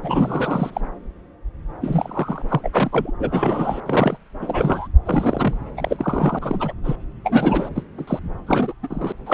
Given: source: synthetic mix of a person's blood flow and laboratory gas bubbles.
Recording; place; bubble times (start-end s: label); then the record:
Doppler ultrasound of blood flow; subclavian vein
0.02-0.70 s: bubbles
0.73-0.81 s: bubbles
1.81-2.42 s: bubbles
2.49-2.70 s: bubbles
2.72-3.11 s: bubbles
3.19-3.80 s: bubbles
3.85-4.17 s: bubbles
4.41-4.88 s: bubbles
5.05-5.57 s: bubbles
5.76-6.39 s: bubbles
6.42-6.72 s: bubbles
6.84-6.96 s: bubbles
7.24-7.70 s: bubbles
7.75-7.83 s: bubbles
7.97-8.20 s: bubbles
8.46-8.73 s: bubbles
8.83-9.12 s: bubbles
9.26-9.34 s: bubbles
From the record:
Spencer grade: 3 (all of the cardiac periods contain showers or single bubble signals, but not dominating or overriding the cardiac motion signals); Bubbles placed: anywhere in the cardiac cycle